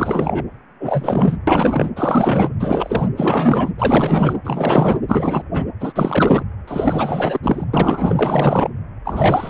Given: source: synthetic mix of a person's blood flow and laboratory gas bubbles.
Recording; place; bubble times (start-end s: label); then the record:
Doppler ultrasound of blood flow; precordium
0.00-0.45 s: bubbles
0.80-1.38 s: bubbles
1.47-1.90 s: bubbles
1.96-2.52 s: bubbles
2.59-3.08 s: bubbles
3.16-3.71 s: bubbles
3.78-4.39 s: bubbles
4.44-4.99 s: bubbles
5.08-5.43 s: bubbles
5.53-5.65 s: bubbles
5.80-5.93 s: bubbles
5.95-6.44 s: bubbles
6.67-7.40 s: bubbles
7.43-7.65 s: bubbles
7.73-8.69 s: bubbles
9.04-9.50 s: bubbles
From the record:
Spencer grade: 4 (maximum detectable bubble signal sounding continuously throughout systole and diastole of every cardiac period, and overriding the amplitude of the normal cardiac signals); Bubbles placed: anywhere in the cardiac cycle